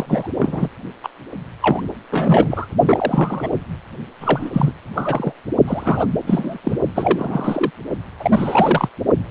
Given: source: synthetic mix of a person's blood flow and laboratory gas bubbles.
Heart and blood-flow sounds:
Doppler ultrasound of blood flow; precordium
0.00-0.28 s: bubbles
0.40-0.68 s: bubbles
1.04-1.09 s: bubbles
1.62-1.81 s: bubbles
2.10-2.67 s: bubbles
2.87-3.49 s: bubbles
4.21-4.50 s: bubbles
4.53-4.72 s: bubbles
4.95-5.33 s: bubbles
5.67-6.06 s: bubbles
6.26-6.57 s: bubbles
6.63-6.78 s: bubbles
6.95-7.71 s: bubbles
8.20-8.89 s: bubbles
From the record:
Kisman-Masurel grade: 343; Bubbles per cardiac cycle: rolling drumbeat, 9 or more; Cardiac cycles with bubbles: 100%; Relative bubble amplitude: loud (0.450 to 0.775); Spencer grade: 3 (all of the cardiac periods contain showers or single bubble signals, but not dominating or overriding the cardiac motion signals); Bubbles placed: only in the low amplitude regions of the cardiac cycle

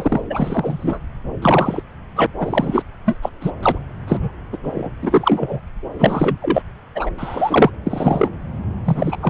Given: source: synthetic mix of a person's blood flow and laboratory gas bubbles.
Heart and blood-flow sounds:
Doppler ultrasound of blood flow; subclavian vein
0.00-0.20 s: bubbles
0.30-0.99 s: bubbles
1.42-1.81 s: bubbles
2.16-2.27 s: bubbles
2.39-2.83 s: bubbles
3.06-3.17 s: bubbles
3.21-3.29 s: bubbles
3.41-3.51 s: bubbles
3.62-3.79 s: bubbles
4.08-4.32 s: bubbles
4.53-4.57 s: bubbles
4.63-4.90 s: bubbles
5.01-5.60 s: bubbles
5.99-6.37 s: bubbles
6.42-6.62 s: bubbles
6.95-7.10 s: bubbles
7.17-7.70 s: bubbles
7.86-8.29 s: bubbles
8.84-9.16 s: bubbles
9.22-9.30 s: bubbles
From the record:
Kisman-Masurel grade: 243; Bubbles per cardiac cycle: several, 3 to 8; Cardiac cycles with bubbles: 100%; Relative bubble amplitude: loud (0.450 to 0.775); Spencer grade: 3 (all of the cardiac periods contain showers or single bubble signals, but not dominating or overriding the cardiac motion signals); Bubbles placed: anywhere in the cardiac cycle

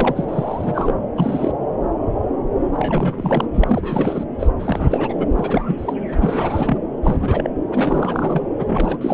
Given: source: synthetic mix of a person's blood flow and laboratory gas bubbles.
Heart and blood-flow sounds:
Doppler ultrasound of blood flow; subclavian vein
0.00-0.24 s: bubbles
0.28-0.94 s: bubbles
1.17-1.52 s: bubbles
2.73-3.46 s: bubbles
3.53-4.25 s: bubbles
4.39-4.47 s: bubbles
4.59-5.15 s: bubbles
5.18-5.95 s: bubbles
6.11-6.78 s: bubbles
7.03-7.50 s: bubbles
7.71-8.47 s: bubbles
8.58-8.98 s: bubbles
9.00-9.13 s: bubbles
From the record:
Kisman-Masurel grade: 332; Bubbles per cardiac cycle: rolling drumbeat, 9 or more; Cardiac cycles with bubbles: 50 to 99%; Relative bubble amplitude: moderate (0.250 to 0.450); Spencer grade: 3 (all of the cardiac periods contain showers or single bubble signals, but not dominating or overriding the cardiac motion signals); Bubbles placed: anywhere in the cardiac cycle

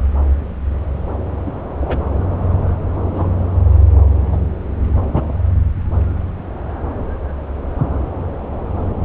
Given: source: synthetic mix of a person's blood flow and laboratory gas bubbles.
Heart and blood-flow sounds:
Doppler ultrasound of blood flow; subclavian vein
1.45-1.52 s: bubbles
1.80-1.97 s: bubbles
3.12-3.30 s: bubbles
4.32-4.37 s: bubbles
5.14-5.22 s: bubbles
From the record:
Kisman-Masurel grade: 122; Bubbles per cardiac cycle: 1 to 2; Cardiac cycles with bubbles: 10 to 50%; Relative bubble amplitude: moderate (0.250 to 0.450); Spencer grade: 2 (many but less than half of the cardiac periods contain bubble signals, singularly or in groups); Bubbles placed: anywhere in the cardiac cycle

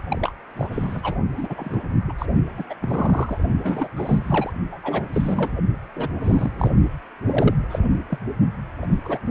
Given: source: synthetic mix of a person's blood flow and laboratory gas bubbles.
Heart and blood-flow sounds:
Doppler ultrasound of blood flow; precordium
0.10-0.32 s: bubbles
0.56-0.67 s: bubbles
0.71-1.15 s: bubbles
1.37-1.79 s: bubbles
2.08-2.14 s: bubbles
2.18-2.26 s: bubbles
2.58-2.64 s: bubbles
2.69-2.75 s: bubbles
2.81-3.38 s: bubbles
3.63-3.88 s: bubbles
3.96-4.51 s: bubbles
4.72-4.79 s: bubbles
4.83-5.04 s: bubbles
5.12-5.53 s: bubbles
5.95-6.09 s: bubbles
6.21-6.52 s: bubbles
6.58-6.71 s: bubbles
7.26-7.54 s: bubbles
7.69-7.79 s: bubbles
8.09-8.19 s: bubbles
8.81-8.87 s: bubbles
8.89-8.98 s: bubbles
9.04-9.19 s: bubbles
From the record:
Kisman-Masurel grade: 242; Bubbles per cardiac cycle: several, 3 to 8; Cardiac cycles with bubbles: 100%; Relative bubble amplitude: moderate (0.250 to 0.450); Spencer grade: 3 (all of the cardiac periods contain showers or single bubble signals, but not dominating or overriding the cardiac motion signals); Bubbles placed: only in the low amplitude regions of the cardiac cycle

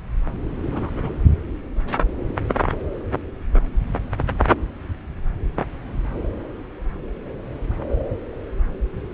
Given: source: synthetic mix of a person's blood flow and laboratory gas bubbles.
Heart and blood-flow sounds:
Doppler ultrasound of blood flow; subclavian vein
0.69-0.90 s: bubbles
0.96-1.10 s: bubbles
From the record:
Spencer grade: 1 (occasional bubble signal discernible with the cardiac motion signal, with majority of cardiac periods free of bubbles); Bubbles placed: anywhere in the cardiac cycle

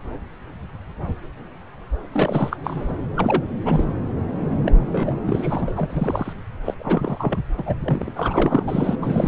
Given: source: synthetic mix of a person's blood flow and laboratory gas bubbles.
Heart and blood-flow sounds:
Doppler ultrasound of blood flow; subclavian vein
2.13-2.56 s: bubbles
2.64-2.93 s: bubbles
3.16-3.42 s: bubbles
3.65-3.84 s: bubbles
4.66-4.71 s: bubbles
4.78-5.13 s: bubbles
5.25-5.71 s: bubbles
5.76-6.33 s: bubbles
6.65-6.74 s: bubbles
6.79-7.39 s: bubbles
7.58-7.63 s: bubbles
7.65-7.75 s: bubbles
7.84-8.12 s: bubbles
8.15-8.63 s: bubbles
8.68-8.96 s: bubbles
9.02-9.27 s: bubbles
From the record:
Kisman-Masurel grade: 332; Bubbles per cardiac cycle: rolling drumbeat, 9 or more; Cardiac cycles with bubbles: 50 to 99%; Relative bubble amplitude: moderate (0.250 to 0.450); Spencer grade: 3 (all of the cardiac periods contain showers or single bubble signals, but not dominating or overriding the cardiac motion signals); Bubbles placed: anywhere in the cardiac cycle

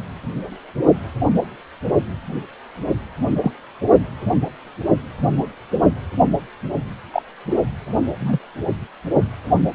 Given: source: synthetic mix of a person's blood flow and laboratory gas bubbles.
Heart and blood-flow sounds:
Doppler ultrasound of blood flow; precordium
3.41-3.51 s: bubbles
7.13-7.22 s: bubbles
8.20-8.39 s: bubbles
From the record:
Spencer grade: 2 (many but less than half of the cardiac periods contain bubble signals, singularly or in groups); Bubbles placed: only in the low amplitude regions of the cardiac cycle

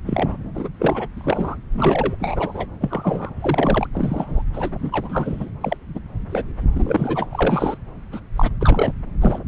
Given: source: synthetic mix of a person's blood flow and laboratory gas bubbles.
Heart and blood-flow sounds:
Doppler ultrasound of blood flow; subclavian vein
0.06-0.36 s: bubbles
0.54-0.69 s: bubbles
0.79-1.07 s: bubbles
1.17-1.55 s: bubbles
1.72-2.16 s: bubbles
2.19-2.66 s: bubbles
2.80-3.34 s: bubbles
3.41-3.87 s: bubbles
3.92-4.42 s: bubbles
4.53-4.70 s: bubbles
4.79-5.49 s: bubbles
5.60-5.76 s: bubbles
5.94-6.00 s: bubbles
6.31-6.43 s: bubbles
6.73-7.26 s: bubbles
7.33-7.78 s: bubbles
8.12-8.20 s: bubbles
8.36-8.51 s: bubbles
8.61-8.93 s: bubbles
9.21-9.40 s: bubbles
From the record:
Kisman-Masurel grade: 242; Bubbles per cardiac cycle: several, 3 to 8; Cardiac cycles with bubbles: 100%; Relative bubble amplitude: moderate (0.250 to 0.450); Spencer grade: 3 (all of the cardiac periods contain showers or single bubble signals, but not dominating or overriding the cardiac motion signals); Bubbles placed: anywhere in the cardiac cycle

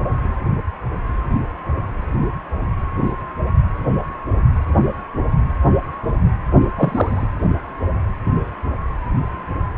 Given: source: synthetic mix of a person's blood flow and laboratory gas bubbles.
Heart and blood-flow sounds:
Doppler ultrasound of blood flow; precordium
6.77-7.27 s: bubbles
From the record:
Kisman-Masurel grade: 113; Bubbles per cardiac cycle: 1 to 2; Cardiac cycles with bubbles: 1 to 10%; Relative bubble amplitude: loud (0.450 to 0.775); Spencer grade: 1 (occasional bubble signal discernible with the cardiac motion signal, with majority of cardiac periods free of bubbles); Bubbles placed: anywhere in the cardiac cycle

